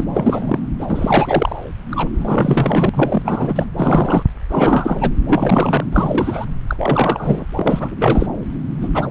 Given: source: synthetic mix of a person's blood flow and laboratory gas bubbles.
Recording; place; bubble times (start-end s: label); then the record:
Doppler ultrasound of blood flow; subclavian vein
0.00-0.05 s: bubbles
0.14-0.60 s: bubbles
0.79-1.62 s: bubbles
1.91-2.08 s: bubbles
2.13-2.89 s: bubbles
2.93-3.65 s: bubbles
3.76-4.23 s: bubbles
4.50-5.12 s: bubbles
5.29-5.84 s: bubbles
5.92-6.46 s: bubbles
6.67-7.46 s: bubbles
7.56-7.95 s: bubbles
7.99-8.27 s: bubbles
8.80-8.88 s: bubbles
8.94-9.11 s: bubbles
From the record:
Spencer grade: 3 (all of the cardiac periods contain showers or single bubble signals, but not dominating or overriding the cardiac motion signals); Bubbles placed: anywhere in the cardiac cycle